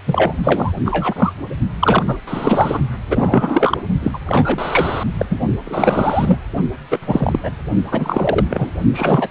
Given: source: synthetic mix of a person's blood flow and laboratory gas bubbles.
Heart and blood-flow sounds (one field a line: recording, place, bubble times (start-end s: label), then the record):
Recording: Doppler ultrasound of blood flow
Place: precordium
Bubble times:
0.07-0.33 s: bubbles
0.43-0.72 s: bubbles
0.85-1.33 s: bubbles
1.79-2.04 s: bubbles
2.07-2.17 s: bubbles
2.27-2.79 s: bubbles
3.08-3.78 s: bubbles
4.03-4.11 s: bubbles
4.13-4.18 s: bubbles
4.26-5.04 s: bubbles
5.17-5.25 s: bubbles
5.30-5.38 s: bubbles
5.65-6.37 s: bubbles
6.91-6.99 s: bubbles
7.01-7.39 s: bubbles
7.43-7.50 s: bubbles
7.85-8.45 s: bubbles
8.49-8.70 s: bubbles
8.93-9.28 s: bubbles
From the record:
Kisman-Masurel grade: 333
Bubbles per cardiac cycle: rolling drumbeat, 9 or more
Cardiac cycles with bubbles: 50 to 99%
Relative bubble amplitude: loud (0.450 to 0.775)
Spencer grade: 3 (all of the cardiac periods contain showers or single bubble signals, but not dominating or overriding the cardiac motion signals)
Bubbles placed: only in the low amplitude regions of the cardiac cycle